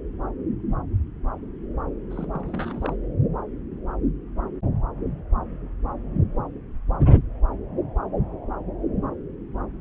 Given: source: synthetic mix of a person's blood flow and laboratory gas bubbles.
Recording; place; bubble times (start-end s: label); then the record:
Doppler ultrasound of blood flow; subclavian vein
2.10-2.96 s: bubbles
From the record:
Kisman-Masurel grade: 211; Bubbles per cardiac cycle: several, 3 to 8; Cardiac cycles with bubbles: 1 to 10%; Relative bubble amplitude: barely perceptible (0.100 to 0.250); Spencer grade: 1 (occasional bubble signal discernible with the cardiac motion signal, with majority of cardiac periods free of bubbles); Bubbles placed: anywhere in the cardiac cycle